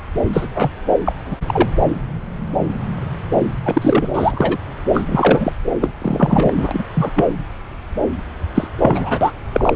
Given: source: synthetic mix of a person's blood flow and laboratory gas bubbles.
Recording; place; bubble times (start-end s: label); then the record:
Doppler ultrasound of blood flow; subclavian vein
0.33-0.48 s: bubbles
0.55-0.72 s: bubbles
1.05-1.12 s: bubbles
1.25-1.36 s: bubbles
1.47-1.70 s: bubbles
3.65-4.09 s: bubbles
4.13-4.58 s: bubbles
4.93-5.04 s: bubbles
5.08-5.53 s: bubbles
5.81-5.92 s: bubbles
6.01-6.53 s: bubbles
6.55-6.83 s: bubbles
6.93-7.11 s: bubbles
7.15-7.26 s: bubbles
8.54-8.68 s: bubbles
8.79-9.31 s: bubbles
9.52-9.73 s: bubbles
From the record:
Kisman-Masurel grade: 233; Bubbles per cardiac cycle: several, 3 to 8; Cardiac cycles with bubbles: 50 to 99%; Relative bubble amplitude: loud (0.450 to 0.775); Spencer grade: 3 (all of the cardiac periods contain showers or single bubble signals, but not dominating or overriding the cardiac motion signals); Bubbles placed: anywhere in the cardiac cycle